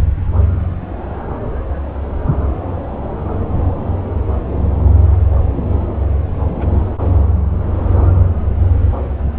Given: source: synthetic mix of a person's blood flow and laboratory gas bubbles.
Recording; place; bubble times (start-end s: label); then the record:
Doppler ultrasound of blood flow; subclavian vein
6.58-6.67 s: bubbles
6.71-6.88 s: bubbles
From the record:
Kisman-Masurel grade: 121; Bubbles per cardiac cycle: 1 to 2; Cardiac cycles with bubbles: 10 to 50%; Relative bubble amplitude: barely perceptible (0.100 to 0.250); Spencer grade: 2 (many but less than half of the cardiac periods contain bubble signals, singularly or in groups); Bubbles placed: anywhere in the cardiac cycle